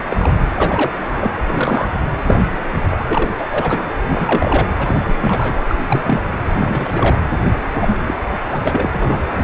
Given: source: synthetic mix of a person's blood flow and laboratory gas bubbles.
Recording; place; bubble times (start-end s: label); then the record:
Doppler ultrasound of blood flow; precordium
0.00-0.03 s: bubbles
0.09-0.32 s: bubbles
0.54-0.92 s: bubbles
1.15-1.28 s: bubbles
1.47-1.89 s: bubbles
2.27-2.39 s: bubbles
2.51-2.57 s: bubbles
2.91-2.97 s: bubbles
3.08-3.29 s: bubbles
3.39-3.48 s: bubbles
3.51-3.85 s: bubbles
4.08-4.67 s: bubbles
4.78-5.16 s: bubbles
5.19-5.64 s: bubbles
5.68-5.75 s: bubbles
5.87-6.01 s: bubbles
6.05-6.21 s: bubbles
6.54-7.19 s: bubbles
7.73-7.95 s: bubbles
8.06-8.14 s: bubbles
8.46-8.57 s: bubbles
8.60-8.90 s: bubbles
8.93-9.18 s: bubbles
From the record:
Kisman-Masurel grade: 242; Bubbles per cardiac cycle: several, 3 to 8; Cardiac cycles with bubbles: 100%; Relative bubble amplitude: moderate (0.250 to 0.450); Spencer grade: 3 (all of the cardiac periods contain showers or single bubble signals, but not dominating or overriding the cardiac motion signals); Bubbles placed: anywhere in the cardiac cycle